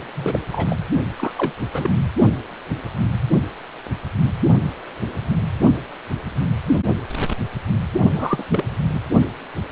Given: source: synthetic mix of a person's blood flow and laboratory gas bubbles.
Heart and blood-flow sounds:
Doppler ultrasound of blood flow; precordium
0.15-0.40 s: bubbles
0.52-0.78 s: bubbles
1.17-1.31 s: bubbles
1.35-1.52 s: bubbles
1.73-1.91 s: bubbles
8.14-8.43 s: bubbles
8.50-8.64 s: bubbles
8.94-9.00 s: bubbles
From the record:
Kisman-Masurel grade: 222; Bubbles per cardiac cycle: several, 3 to 8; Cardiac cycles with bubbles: 10 to 50%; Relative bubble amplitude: moderate (0.250 to 0.450); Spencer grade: 2 (many but less than half of the cardiac periods contain bubble signals, singularly or in groups); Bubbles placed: only in the low amplitude regions of the cardiac cycle

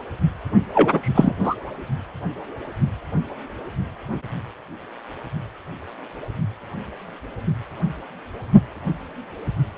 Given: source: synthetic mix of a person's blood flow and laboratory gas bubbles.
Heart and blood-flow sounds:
Doppler ultrasound of blood flow; precordium
0.74-1.35 s: bubbles
1.43-1.55 s: bubbles
From the record:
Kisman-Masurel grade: 213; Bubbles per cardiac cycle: several, 3 to 8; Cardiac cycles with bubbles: 1 to 10%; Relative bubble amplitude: loud (0.450 to 0.775); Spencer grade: 1 (occasional bubble signal discernible with the cardiac motion signal, with majority of cardiac periods free of bubbles); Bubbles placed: only in the low amplitude regions of the cardiac cycle

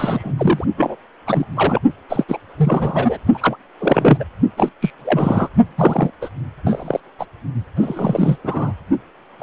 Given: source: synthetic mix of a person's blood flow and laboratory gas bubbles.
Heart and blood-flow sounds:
Doppler ultrasound of blood flow; precordium
0.00-0.34 s: bubbles
0.37-0.65 s: bubbles
0.77-0.96 s: bubbles
1.26-1.45 s: bubbles
1.55-1.82 s: bubbles
2.09-2.24 s: bubbles
2.28-2.38 s: bubbles
2.57-3.17 s: bubbles
3.34-3.56 s: bubbles
3.79-4.24 s: bubbles
4.57-4.72 s: bubbles
4.81-4.91 s: bubbles
5.04-5.49 s: bubbles
5.78-6.11 s: bubbles
6.21-6.29 s: bubbles
6.66-7.00 s: bubbles
7.19-7.25 s: bubbles
7.76-8.38 s: bubbles
8.43-8.72 s: bubbles
9.39-9.43 s: bubbles
From the record:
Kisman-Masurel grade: 343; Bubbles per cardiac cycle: rolling drumbeat, 9 or more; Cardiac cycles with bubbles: 100%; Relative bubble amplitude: loud (0.450 to 0.775); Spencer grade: 3 (all of the cardiac periods contain showers or single bubble signals, but not dominating or overriding the cardiac motion signals); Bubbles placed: only in the low amplitude regions of the cardiac cycle

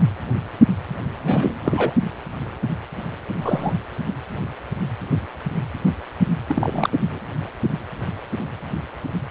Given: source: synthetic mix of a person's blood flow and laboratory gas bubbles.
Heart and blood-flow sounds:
Doppler ultrasound of blood flow; precordium
1.23-1.58 s: bubbles
1.65-1.94 s: bubbles
3.41-3.73 s: bubbles
6.48-6.90 s: bubbles
7.04-7.19 s: bubbles
From the record:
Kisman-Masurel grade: 222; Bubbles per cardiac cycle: several, 3 to 8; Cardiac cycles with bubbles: 10 to 50%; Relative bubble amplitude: moderate (0.250 to 0.450); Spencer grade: 2 (many but less than half of the cardiac periods contain bubble signals, singularly or in groups); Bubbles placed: anywhere in the cardiac cycle

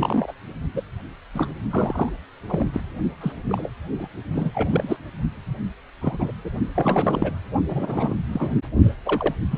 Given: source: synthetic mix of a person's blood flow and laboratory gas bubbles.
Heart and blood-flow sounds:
Doppler ultrasound of blood flow; precordium
0.00-0.33 s: bubbles
0.73-0.82 s: bubbles
1.34-1.56 s: bubbles
1.70-2.09 s: bubbles
2.48-2.67 s: bubbles
2.73-2.80 s: bubbles
3.21-3.32 s: bubbles
3.49-3.69 s: bubbles
3.94-4.08 s: bubbles
4.33-4.52 s: bubbles
4.54-4.97 s: bubbles
6.01-6.32 s: bubbles
6.44-6.50 s: bubbles
6.75-7.35 s: bubbles
7.68-8.14 s: bubbles
8.33-8.51 s: bubbles
9.05-9.34 s: bubbles
9.51-9.58 s: bubbles
From the record:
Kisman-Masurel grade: 242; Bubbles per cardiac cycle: several, 3 to 8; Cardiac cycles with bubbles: 100%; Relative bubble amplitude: moderate (0.250 to 0.450); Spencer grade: 3 (all of the cardiac periods contain showers or single bubble signals, but not dominating or overriding the cardiac motion signals); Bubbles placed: only in the low amplitude regions of the cardiac cycle

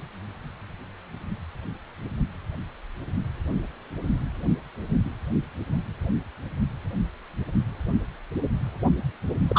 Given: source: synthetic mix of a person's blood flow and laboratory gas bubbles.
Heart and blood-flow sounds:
Doppler ultrasound of blood flow; precordium
9.48-9.59 s: bubbles
From the record:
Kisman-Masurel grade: 112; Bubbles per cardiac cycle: 1 to 2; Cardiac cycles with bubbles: 1 to 10%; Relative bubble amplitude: moderate (0.250 to 0.450); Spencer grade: 1 (occasional bubble signal discernible with the cardiac motion signal, with majority of cardiac periods free of bubbles); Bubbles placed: only in the low amplitude regions of the cardiac cycle

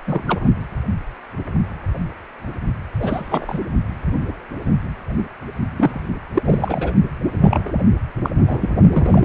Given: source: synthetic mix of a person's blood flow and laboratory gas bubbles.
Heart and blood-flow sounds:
Doppler ultrasound of blood flow; precordium
0.07-0.23 s: bubbles
0.27-0.41 s: bubbles
2.99-3.59 s: bubbles
5.76-6.10 s: bubbles
6.33-6.91 s: bubbles
7.41-7.71 s: bubbles
8.22-8.29 s: bubbles
8.46-8.71 s: bubbles
8.90-9.25 s: bubbles
From the record:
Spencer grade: 2 (many but less than half of the cardiac periods contain bubble signals, singularly or in groups); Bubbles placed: only in the low amplitude regions of the cardiac cycle

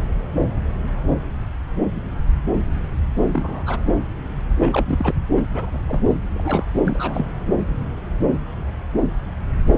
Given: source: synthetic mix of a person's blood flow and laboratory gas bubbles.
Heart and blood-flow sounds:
Doppler ultrasound of blood flow; subclavian vein
3.34-3.64 s: bubbles
3.66-3.78 s: bubbles
4.58-5.14 s: bubbles
5.36-5.42 s: bubbles
5.54-5.79 s: bubbles
5.83-6.02 s: bubbles
6.34-6.64 s: bubbles
6.83-7.26 s: bubbles
From the record:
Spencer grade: 2 (many but less than half of the cardiac periods contain bubble signals, singularly or in groups); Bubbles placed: anywhere in the cardiac cycle

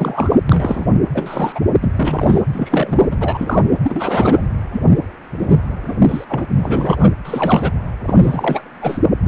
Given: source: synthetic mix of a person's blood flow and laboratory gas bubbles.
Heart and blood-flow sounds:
Doppler ultrasound of blood flow; precordium
0.00-0.42 s: bubbles
0.49-0.85 s: bubbles
1.13-1.59 s: bubbles
1.81-2.46 s: bubbles
2.52-3.17 s: bubbles
3.21-3.62 s: bubbles
3.83-4.41 s: bubbles
4.72-4.81 s: bubbles
5.39-5.59 s: bubbles
5.87-5.94 s: bubbles
6.02-6.25 s: bubbles
6.29-6.53 s: bubbles
6.58-7.10 s: bubbles
7.25-7.71 s: bubbles
8.05-8.68 s: bubbles
8.81-8.99 s: bubbles
9.23-9.28 s: bubbles
From the record:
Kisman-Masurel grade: 243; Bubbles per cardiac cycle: several, 3 to 8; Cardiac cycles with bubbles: 100%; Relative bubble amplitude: loud (0.450 to 0.775); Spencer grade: 3 (all of the cardiac periods contain showers or single bubble signals, but not dominating or overriding the cardiac motion signals); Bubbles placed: anywhere in the cardiac cycle

